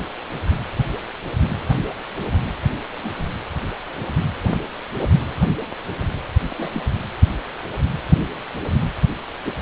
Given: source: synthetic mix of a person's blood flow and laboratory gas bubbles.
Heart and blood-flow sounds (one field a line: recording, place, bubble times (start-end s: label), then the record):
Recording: Doppler ultrasound of blood flow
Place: precordium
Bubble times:
2.92-3.10 s: bubbles
6.57-6.86 s: bubbles
9.46-9.54 s: bubbles
From the record:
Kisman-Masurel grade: 121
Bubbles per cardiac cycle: 1 to 2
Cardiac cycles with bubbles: 10 to 50%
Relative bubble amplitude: barely perceptible (0.100 to 0.250)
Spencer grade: 2 (many but less than half of the cardiac periods contain bubble signals, singularly or in groups)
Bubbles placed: anywhere in the cardiac cycle